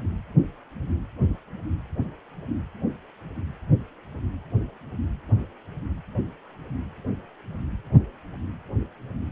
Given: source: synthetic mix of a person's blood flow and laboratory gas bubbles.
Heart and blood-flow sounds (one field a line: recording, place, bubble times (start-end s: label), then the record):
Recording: Doppler ultrasound of blood flow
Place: precordium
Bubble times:
no bubbles
From the record:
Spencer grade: 0 (complete lack of bubble signals)